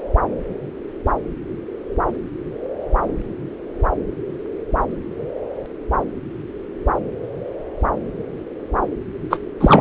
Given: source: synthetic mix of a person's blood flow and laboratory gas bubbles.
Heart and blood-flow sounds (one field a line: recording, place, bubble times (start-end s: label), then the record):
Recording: Doppler ultrasound of blood flow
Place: subclavian vein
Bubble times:
9.30-9.38 s: bubbles
9.61-9.81 s: bubbles
From the record:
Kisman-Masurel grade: 213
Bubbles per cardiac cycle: several, 3 to 8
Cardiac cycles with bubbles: 1 to 10%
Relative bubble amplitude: loud (0.450 to 0.775)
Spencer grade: 1 (occasional bubble signal discernible with the cardiac motion signal, with majority of cardiac periods free of bubbles)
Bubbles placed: anywhere in the cardiac cycle